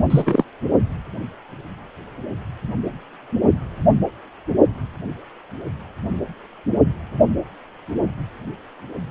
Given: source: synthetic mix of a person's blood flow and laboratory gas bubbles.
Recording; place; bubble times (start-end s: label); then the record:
Doppler ultrasound of blood flow; precordium
0.09-0.44 s: bubbles
From the record:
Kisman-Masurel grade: 213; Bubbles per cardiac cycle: several, 3 to 8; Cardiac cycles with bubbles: 1 to 10%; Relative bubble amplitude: loud (0.450 to 0.775); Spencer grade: 1 (occasional bubble signal discernible with the cardiac motion signal, with majority of cardiac periods free of bubbles); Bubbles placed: only in the low amplitude regions of the cardiac cycle